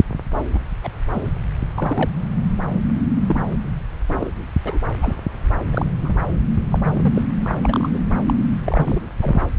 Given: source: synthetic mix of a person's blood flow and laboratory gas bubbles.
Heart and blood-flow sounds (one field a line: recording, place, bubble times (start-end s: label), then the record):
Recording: Doppler ultrasound of blood flow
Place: subclavian vein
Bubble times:
0.53-0.59 s: bubbles
0.83-0.89 s: bubbles
1.14-1.30 s: bubbles
1.77-2.10 s: bubbles
3.27-3.42 s: bubbles
4.08-4.32 s: bubbles
4.64-4.79 s: bubbles
5.01-5.15 s: bubbles
5.71-5.85 s: bubbles
6.02-6.13 s: bubbles
6.71-6.79 s: bubbles
6.83-7.22 s: bubbles
7.42-7.55 s: bubbles
7.62-7.99 s: bubbles
8.26-8.34 s: bubbles
8.57-9.02 s: bubbles
9.22-9.41 s: bubbles
From the record:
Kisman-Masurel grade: 242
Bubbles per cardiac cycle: several, 3 to 8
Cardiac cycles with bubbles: 100%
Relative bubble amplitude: moderate (0.250 to 0.450)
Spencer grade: 3 (all of the cardiac periods contain showers or single bubble signals, but not dominating or overriding the cardiac motion signals)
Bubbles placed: anywhere in the cardiac cycle